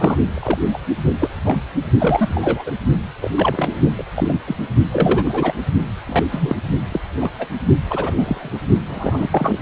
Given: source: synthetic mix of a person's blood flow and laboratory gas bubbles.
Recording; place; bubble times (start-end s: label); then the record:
Doppler ultrasound of blood flow; precordium
0.00-0.17 s: bubbles
0.34-0.59 s: bubbles
0.73-0.78 s: bubbles
1.20-1.29 s: bubbles
1.44-1.56 s: bubbles
2.00-2.72 s: bubbles
3.22-3.29 s: bubbles
3.35-3.77 s: bubbles
3.98-4.03 s: bubbles
4.15-4.33 s: bubbles
4.46-4.57 s: bubbles
4.91-5.53 s: bubbles
6.06-6.24 s: bubbles
6.30-6.56 s: bubbles
6.92-7.00 s: bubbles
7.21-7.32 s: bubbles
7.39-7.48 s: bubbles
7.90-8.12 s: bubbles
8.17-8.58 s: bubbles
8.88-9.27 s: bubbles
9.31-9.58 s: bubbles
From the record:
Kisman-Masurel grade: 242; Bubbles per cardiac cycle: several, 3 to 8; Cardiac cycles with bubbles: 100%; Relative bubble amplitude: moderate (0.250 to 0.450); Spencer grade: 3 (all of the cardiac periods contain showers or single bubble signals, but not dominating or overriding the cardiac motion signals); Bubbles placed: only in the low amplitude regions of the cardiac cycle